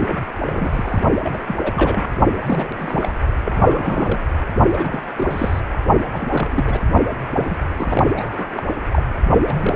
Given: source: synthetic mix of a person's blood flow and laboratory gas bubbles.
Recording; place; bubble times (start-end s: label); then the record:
Doppler ultrasound of blood flow; precordium
0.00-0.18 s: bubbles
0.40-1.03 s: bubbles
1.23-1.56 s: bubbles
1.62-2.09 s: bubbles
2.33-2.68 s: bubbles
2.78-3.14 s: bubbles
3.44-4.19 s: bubbles
4.72-5.03 s: bubbles
5.16-5.60 s: bubbles
6.12-6.79 s: bubbles
7.35-7.57 s: bubbles
7.78-8.06 s: bubbles
8.15-8.48 s: bubbles
8.52-8.75 s: bubbles
8.91-9.03 s: bubbles
9.46-9.76 s: bubbles
From the record:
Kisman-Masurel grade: 342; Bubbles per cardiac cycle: rolling drumbeat, 9 or more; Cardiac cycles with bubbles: 100%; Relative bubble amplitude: moderate (0.250 to 0.450); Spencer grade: 3 (all of the cardiac periods contain showers or single bubble signals, but not dominating or overriding the cardiac motion signals); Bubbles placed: only in the low amplitude regions of the cardiac cycle